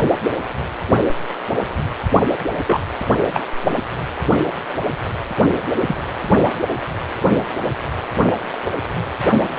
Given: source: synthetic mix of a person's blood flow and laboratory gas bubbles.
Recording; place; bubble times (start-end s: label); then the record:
Doppler ultrasound of blood flow; precordium
2.67-2.80 s: bubbles
3.34-3.40 s: bubbles
5.86-5.96 s: bubbles
From the record:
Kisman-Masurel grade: 122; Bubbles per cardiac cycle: 1 to 2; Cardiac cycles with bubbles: 10 to 50%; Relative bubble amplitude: moderate (0.250 to 0.450); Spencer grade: 2 (many but less than half of the cardiac periods contain bubble signals, singularly or in groups); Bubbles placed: only in the low amplitude regions of the cardiac cycle